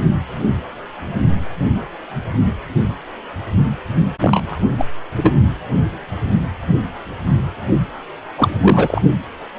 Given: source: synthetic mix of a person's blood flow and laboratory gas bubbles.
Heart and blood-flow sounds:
Doppler ultrasound of blood flow; precordium
4.21-4.58 s: bubbles
4.78-4.85 s: bubbles
5.17-5.32 s: bubbles
8.37-9.02 s: bubbles
From the record:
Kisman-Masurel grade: 223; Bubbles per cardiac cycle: several, 3 to 8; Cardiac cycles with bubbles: 10 to 50%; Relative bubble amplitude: loud (0.450 to 0.775); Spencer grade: 2 (many but less than half of the cardiac periods contain bubble signals, singularly or in groups); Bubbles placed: only in the low amplitude regions of the cardiac cycle

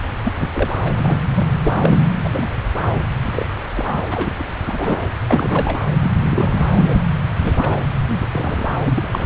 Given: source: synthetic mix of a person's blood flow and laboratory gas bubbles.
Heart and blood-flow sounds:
Doppler ultrasound of blood flow; subclavian vein
0.25-0.33 s: bubbles
0.37-0.51 s: bubbles
0.53-0.70 s: bubbles
0.79-0.93 s: bubbles
0.97-1.20 s: bubbles
1.34-1.47 s: bubbles
1.64-2.03 s: bubbles
2.25-2.29 s: bubbles
2.32-2.50 s: bubbles
3.23-3.54 s: bubbles
3.74-4.02 s: bubbles
4.12-4.31 s: bubbles
4.39-4.43 s: bubbles
4.67-5.07 s: bubbles
5.28-5.79 s: bubbles
6.03-6.11 s: bubbles
6.21-6.67 s: bubbles
6.76-7.02 s: bubbles
7.35-7.84 s: bubbles
8.10-8.18 s: bubbles
8.22-8.26 s: bubbles
8.32-8.67 s: bubbles
8.86-9.26 s: bubbles
From the record:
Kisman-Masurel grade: 242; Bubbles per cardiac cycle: several, 3 to 8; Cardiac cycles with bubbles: 100%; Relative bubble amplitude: moderate (0.250 to 0.450); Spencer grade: 3 (all of the cardiac periods contain showers or single bubble signals, but not dominating or overriding the cardiac motion signals); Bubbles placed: anywhere in the cardiac cycle

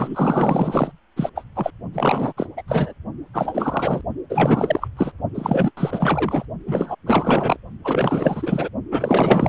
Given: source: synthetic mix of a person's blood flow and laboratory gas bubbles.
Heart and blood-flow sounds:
Doppler ultrasound of blood flow; precordium
0.00-0.92 s: bubbles
1.16-1.30 s: bubbles
1.35-1.44 s: bubbles
1.55-1.71 s: bubbles
1.93-2.33 s: bubbles
2.37-2.46 s: bubbles
2.57-2.62 s: bubbles
2.68-2.93 s: bubbles
3.33-4.01 s: bubbles
4.29-4.88 s: bubbles
4.96-5.12 s: bubbles
5.34-5.71 s: bubbles
5.77-6.45 s: bubbles
6.67-6.95 s: bubbles
7.05-7.59 s: bubbles
7.84-8.69 s: bubbles
8.91-9.49 s: bubbles
From the record:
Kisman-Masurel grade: 444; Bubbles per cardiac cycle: continuous sound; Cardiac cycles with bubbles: 100%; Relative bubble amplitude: maximal (0.775 to 0.999); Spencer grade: 4 (maximum detectable bubble signal sounding continuously throughout systole and diastole of every cardiac period, and overriding the amplitude of the normal cardiac signals); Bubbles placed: only in the low amplitude regions of the cardiac cycle

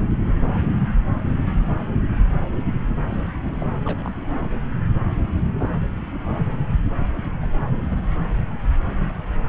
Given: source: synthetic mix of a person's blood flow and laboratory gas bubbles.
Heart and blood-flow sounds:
Doppler ultrasound of blood flow; subclavian vein
0.24-0.39 s: bubbles
3.10-3.17 s: bubbles
3.60-3.69 s: bubbles
3.85-4.11 s: bubbles
5.61-5.78 s: bubbles
7.40-7.50 s: bubbles
7.76-7.97 s: bubbles
From the record:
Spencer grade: 2 (many but less than half of the cardiac periods contain bubble signals, singularly or in groups); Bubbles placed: anywhere in the cardiac cycle

